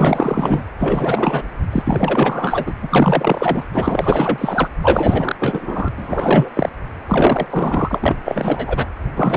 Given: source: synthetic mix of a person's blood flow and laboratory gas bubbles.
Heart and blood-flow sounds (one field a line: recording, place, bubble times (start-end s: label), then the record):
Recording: Doppler ultrasound of blood flow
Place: precordium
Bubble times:
0.00-0.65 s: bubbles
0.80-1.48 s: bubbles
1.71-2.73 s: bubbles
2.82-3.65 s: bubbles
3.73-4.69 s: bubbles
4.81-5.36 s: bubbles
5.39-5.89 s: bubbles
5.97-6.50 s: bubbles
6.54-6.69 s: bubbles
7.08-7.47 s: bubbles
7.50-8.16 s: bubbles
8.24-8.87 s: bubbles
9.16-9.37 s: bubbles
From the record:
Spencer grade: 4 (maximum detectable bubble signal sounding continuously throughout systole and diastole of every cardiac period, and overriding the amplitude of the normal cardiac signals)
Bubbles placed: anywhere in the cardiac cycle